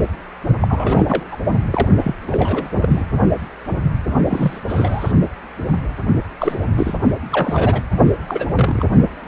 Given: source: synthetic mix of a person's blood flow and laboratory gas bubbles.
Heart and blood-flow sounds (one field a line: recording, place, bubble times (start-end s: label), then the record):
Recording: Doppler ultrasound of blood flow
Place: precordium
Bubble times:
0.61-1.24 s: bubbles
1.31-1.37 s: bubbles
1.71-1.88 s: bubbles
1.98-2.15 s: bubbles
2.23-2.70 s: bubbles
2.80-3.06 s: bubbles
4.27-5.12 s: bubbles
6.38-6.56 s: bubbles
6.72-6.97 s: bubbles
7.31-7.82 s: bubbles
8.29-8.46 s: bubbles
8.55-8.85 s: bubbles
From the record:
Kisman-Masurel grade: 232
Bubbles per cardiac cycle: several, 3 to 8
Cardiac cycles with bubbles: 50 to 99%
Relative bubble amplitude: moderate (0.250 to 0.450)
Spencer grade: 3 (all of the cardiac periods contain showers or single bubble signals, but not dominating or overriding the cardiac motion signals)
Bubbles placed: only in the low amplitude regions of the cardiac cycle